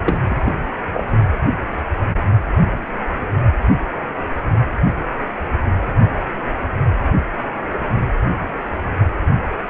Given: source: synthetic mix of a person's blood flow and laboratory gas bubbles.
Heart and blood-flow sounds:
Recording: Doppler ultrasound of blood flow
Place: precordium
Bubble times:
0.06-0.55 s: bubbles
0.93-1.04 s: bubbles
From the record:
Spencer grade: 1 (occasional bubble signal discernible with the cardiac motion signal, with majority of cardiac periods free of bubbles)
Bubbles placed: only in the low amplitude regions of the cardiac cycle

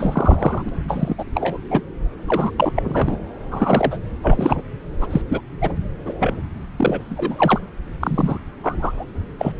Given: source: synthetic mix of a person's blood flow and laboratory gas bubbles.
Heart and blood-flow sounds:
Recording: Doppler ultrasound of blood flow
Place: subclavian vein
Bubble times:
0.00-0.69 s: bubbles
0.88-1.15 s: bubbles
1.18-1.24 s: bubbles
1.34-1.58 s: bubbles
1.70-1.81 s: bubbles
2.27-2.51 s: bubbles
2.57-2.71 s: bubbles
2.75-3.17 s: bubbles
3.50-3.97 s: bubbles
4.22-4.62 s: bubbles
4.99-5.08 s: bubbles
5.10-5.22 s: bubbles
5.29-5.41 s: bubbles
5.61-5.73 s: bubbles
6.05-6.16 s: bubbles
6.20-6.33 s: bubbles
6.76-7.60 s: bubbles
8.00-8.39 s: bubbles
8.63-9.04 s: bubbles
9.39-9.52 s: bubbles
From the record:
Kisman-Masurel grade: 243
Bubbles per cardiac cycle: several, 3 to 8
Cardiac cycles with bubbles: 100%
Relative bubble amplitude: loud (0.450 to 0.775)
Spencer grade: 3 (all of the cardiac periods contain showers or single bubble signals, but not dominating or overriding the cardiac motion signals)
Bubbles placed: anywhere in the cardiac cycle

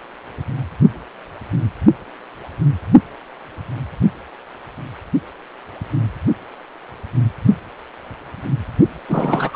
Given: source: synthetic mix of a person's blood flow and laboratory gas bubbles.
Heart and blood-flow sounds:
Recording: Doppler ultrasound of blood flow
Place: precordium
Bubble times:
9.08-9.56 s: bubbles
From the record:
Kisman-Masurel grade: 212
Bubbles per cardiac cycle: several, 3 to 8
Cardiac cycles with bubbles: 1 to 10%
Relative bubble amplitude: moderate (0.250 to 0.450)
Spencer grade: 1 (occasional bubble signal discernible with the cardiac motion signal, with majority of cardiac periods free of bubbles)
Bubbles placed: only in the low amplitude regions of the cardiac cycle

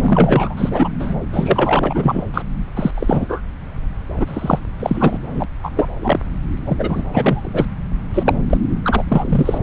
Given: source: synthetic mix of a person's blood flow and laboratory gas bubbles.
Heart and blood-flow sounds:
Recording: Doppler ultrasound of blood flow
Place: subclavian vein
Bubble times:
0.00-0.88 s: bubbles
0.99-1.14 s: bubbles
1.33-2.25 s: bubbles
2.33-2.42 s: bubbles
2.75-2.91 s: bubbles
2.94-3.41 s: bubbles
4.17-4.25 s: bubbles
4.28-4.59 s: bubbles
4.79-5.18 s: bubbles
5.34-5.46 s: bubbles
5.63-5.70 s: bubbles
5.75-5.90 s: bubbles
6.00-6.20 s: bubbles
6.65-7.03 s: bubbles
7.12-7.66 s: bubbles
8.14-8.35 s: bubbles
8.49-8.57 s: bubbles
8.84-9.03 s: bubbles
9.08-9.58 s: bubbles
From the record:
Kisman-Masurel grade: 333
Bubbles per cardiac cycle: rolling drumbeat, 9 or more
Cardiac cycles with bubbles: 50 to 99%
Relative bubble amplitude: loud (0.450 to 0.775)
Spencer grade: 3 (all of the cardiac periods contain showers or single bubble signals, but not dominating or overriding the cardiac motion signals)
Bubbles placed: anywhere in the cardiac cycle

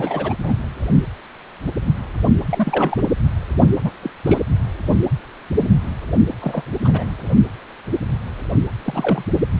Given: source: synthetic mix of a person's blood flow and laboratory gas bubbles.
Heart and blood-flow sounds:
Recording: Doppler ultrasound of blood flow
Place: precordium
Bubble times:
0.00-0.34 s: bubbles
0.44-0.54 s: bubbles
2.50-3.02 s: bubbles
3.84-3.91 s: bubbles
4.02-4.10 s: bubbles
4.25-4.38 s: bubbles
6.42-6.62 s: bubbles
6.84-7.17 s: bubbles
8.83-9.24 s: bubbles
From the record:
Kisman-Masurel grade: 222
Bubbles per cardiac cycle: several, 3 to 8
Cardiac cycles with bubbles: 10 to 50%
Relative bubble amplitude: moderate (0.250 to 0.450)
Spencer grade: 2 (many but less than half of the cardiac periods contain bubble signals, singularly or in groups)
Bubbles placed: anywhere in the cardiac cycle

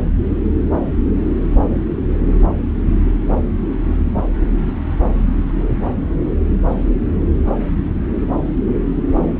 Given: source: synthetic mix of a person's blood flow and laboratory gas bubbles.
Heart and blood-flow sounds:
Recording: Doppler ultrasound of blood flow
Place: subclavian vein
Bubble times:
no bubbles
From the record:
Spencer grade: 0 (complete lack of bubble signals)

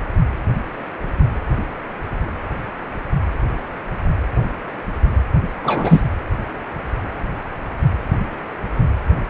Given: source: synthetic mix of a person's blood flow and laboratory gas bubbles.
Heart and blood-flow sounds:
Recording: Doppler ultrasound of blood flow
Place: precordium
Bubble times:
5.63-6.00 s: bubbles
From the record:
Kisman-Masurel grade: 213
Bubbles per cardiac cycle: several, 3 to 8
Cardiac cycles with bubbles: 1 to 10%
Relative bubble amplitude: loud (0.450 to 0.775)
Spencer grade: 1 (occasional bubble signal discernible with the cardiac motion signal, with majority of cardiac periods free of bubbles)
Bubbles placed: anywhere in the cardiac cycle

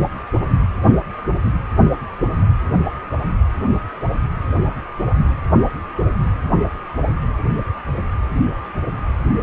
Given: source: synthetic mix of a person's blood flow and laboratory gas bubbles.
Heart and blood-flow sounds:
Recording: Doppler ultrasound of blood flow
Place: precordium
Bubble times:
no bubbles
From the record:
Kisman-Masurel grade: 000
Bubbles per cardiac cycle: 0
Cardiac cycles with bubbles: 0%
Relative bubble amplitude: no bubbles discernible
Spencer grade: 0 (complete lack of bubble signals)

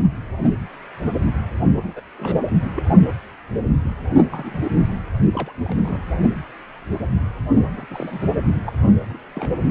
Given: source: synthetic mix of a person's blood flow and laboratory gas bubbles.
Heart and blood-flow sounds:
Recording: Doppler ultrasound of blood flow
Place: precordium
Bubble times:
1.83-1.93 s: bubbles
1.96-2.00 s: bubbles
2.19-2.38 s: bubbles
2.47-2.54 s: bubbles
2.75-2.83 s: bubbles
4.30-4.61 s: bubbles
4.78-4.95 s: bubbles
5.33-5.52 s: bubbles
5.63-6.00 s: bubbles
7.76-7.85 s: bubbles
7.91-8.46 s: bubbles
8.64-8.72 s: bubbles
9.09-9.19 s: bubbles
9.35-9.71 s: bubbles
From the record:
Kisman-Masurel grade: 221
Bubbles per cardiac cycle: several, 3 to 8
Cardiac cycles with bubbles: 10 to 50%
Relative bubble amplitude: barely perceptible (0.100 to 0.250)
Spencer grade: 2 (many but less than half of the cardiac periods contain bubble signals, singularly or in groups)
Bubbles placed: only in the low amplitude regions of the cardiac cycle

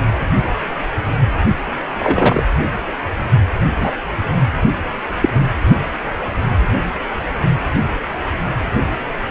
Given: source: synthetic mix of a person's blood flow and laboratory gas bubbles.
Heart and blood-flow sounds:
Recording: Doppler ultrasound of blood flow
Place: precordium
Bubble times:
1.98-2.43 s: bubbles
3.74-3.92 s: bubbles
5.21-5.29 s: bubbles
From the record:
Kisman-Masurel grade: 123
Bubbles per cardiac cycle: 1 to 2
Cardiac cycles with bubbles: 10 to 50%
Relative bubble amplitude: loud (0.450 to 0.775)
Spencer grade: 2 (many but less than half of the cardiac periods contain bubble signals, singularly or in groups)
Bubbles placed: anywhere in the cardiac cycle

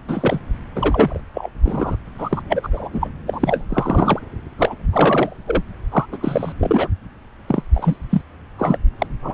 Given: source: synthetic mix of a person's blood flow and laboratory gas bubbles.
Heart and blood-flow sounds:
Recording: Doppler ultrasound of blood flow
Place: subclavian vein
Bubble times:
0.08-0.41 s: bubbles
0.75-1.21 s: bubbles
1.34-1.50 s: bubbles
1.63-1.96 s: bubbles
2.18-2.42 s: bubbles
2.48-2.69 s: bubbles
2.73-2.90 s: bubbles
2.92-3.07 s: bubbles
3.27-3.65 s: bubbles
3.68-4.20 s: bubbles
4.58-4.75 s: bubbles
4.91-5.37 s: bubbles
5.46-5.62 s: bubbles
5.91-6.06 s: bubbles
6.12-6.18 s: bubbles
6.21-6.52 s: bubbles
6.58-6.88 s: bubbles
7.48-7.63 s: bubbles
7.73-7.97 s: bubbles
8.10-8.22 s: bubbles
8.58-8.78 s: bubbles
8.99-9.07 s: bubbles
9.22-9.34 s: bubbles
From the record:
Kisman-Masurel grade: 343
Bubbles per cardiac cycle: rolling drumbeat, 9 or more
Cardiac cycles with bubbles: 100%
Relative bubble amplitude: loud (0.450 to 0.775)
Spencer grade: 3 (all of the cardiac periods contain showers or single bubble signals, but not dominating or overriding the cardiac motion signals)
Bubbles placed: anywhere in the cardiac cycle

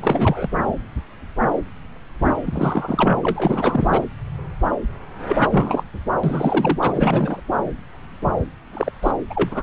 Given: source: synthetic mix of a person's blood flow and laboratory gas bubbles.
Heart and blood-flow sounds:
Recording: Doppler ultrasound of blood flow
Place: subclavian vein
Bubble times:
0.00-0.49 s: bubbles
2.24-3.18 s: bubbles
3.23-4.04 s: bubbles
5.27-5.83 s: bubbles
6.23-6.79 s: bubbles
6.82-7.42 s: bubbles
8.74-8.91 s: bubbles
9.03-9.11 s: bubbles
9.29-9.63 s: bubbles
From the record:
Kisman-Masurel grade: 333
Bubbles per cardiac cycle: rolling drumbeat, 9 or more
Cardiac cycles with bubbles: 50 to 99%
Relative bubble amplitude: loud (0.450 to 0.775)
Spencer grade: 3 (all of the cardiac periods contain showers or single bubble signals, but not dominating or overriding the cardiac motion signals)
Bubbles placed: anywhere in the cardiac cycle

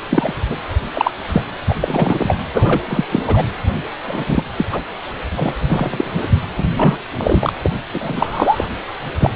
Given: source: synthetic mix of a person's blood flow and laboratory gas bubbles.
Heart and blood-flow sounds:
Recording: Doppler ultrasound of blood flow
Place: precordium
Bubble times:
0.09-0.33 s: bubbles
0.49-0.55 s: bubbles
0.94-1.11 s: bubbles
1.27-1.43 s: bubbles
1.67-1.75 s: bubbles
1.80-2.35 s: bubbles
2.53-2.81 s: bubbles
2.89-3.04 s: bubbles
3.11-3.22 s: bubbles
3.27-3.44 s: bubbles
4.08-4.25 s: bubbles
4.29-4.43 s: bubbles
4.58-4.66 s: bubbles
4.72-4.80 s: bubbles
5.35-6.11 s: bubbles
6.57-6.68 s: bubbles
6.76-6.97 s: bubbles
7.17-7.52 s: bubbles
7.63-7.70 s: bubbles
7.93-8.66 s: bubbles
9.19-9.31 s: bubbles
From the record:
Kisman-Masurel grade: 243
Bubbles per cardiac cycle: several, 3 to 8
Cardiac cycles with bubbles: 100%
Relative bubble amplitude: loud (0.450 to 0.775)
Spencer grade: 3 (all of the cardiac periods contain showers or single bubble signals, but not dominating or overriding the cardiac motion signals)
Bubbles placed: anywhere in the cardiac cycle

